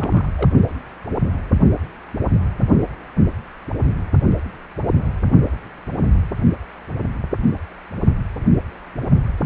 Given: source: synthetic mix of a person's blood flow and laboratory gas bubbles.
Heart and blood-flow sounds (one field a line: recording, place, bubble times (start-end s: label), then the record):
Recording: Doppler ultrasound of blood flow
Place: precordium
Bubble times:
0.00-0.27 s: bubbles
0.38-0.49 s: bubbles
From the record:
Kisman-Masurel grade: 211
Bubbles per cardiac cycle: several, 3 to 8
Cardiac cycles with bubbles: 1 to 10%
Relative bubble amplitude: barely perceptible (0.100 to 0.250)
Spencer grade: 1 (occasional bubble signal discernible with the cardiac motion signal, with majority of cardiac periods free of bubbles)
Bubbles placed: only in the low amplitude regions of the cardiac cycle